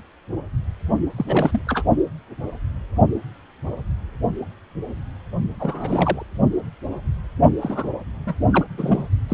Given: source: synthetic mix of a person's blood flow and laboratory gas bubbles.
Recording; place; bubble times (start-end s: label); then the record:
Doppler ultrasound of blood flow; precordium
1.17-1.26 s: bubbles
1.28-1.62 s: bubbles
1.67-1.83 s: bubbles
5.58-6.22 s: bubbles
7.60-7.90 s: bubbles
8.26-8.35 s: bubbles
8.50-8.64 s: bubbles
8.77-9.08 s: bubbles
9.28-9.33 s: bubbles
From the record:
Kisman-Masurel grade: 222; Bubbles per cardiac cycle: several, 3 to 8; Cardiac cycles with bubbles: 10 to 50%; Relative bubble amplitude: moderate (0.250 to 0.450); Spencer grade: 2 (many but less than half of the cardiac periods contain bubble signals, singularly or in groups); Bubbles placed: only in the low amplitude regions of the cardiac cycle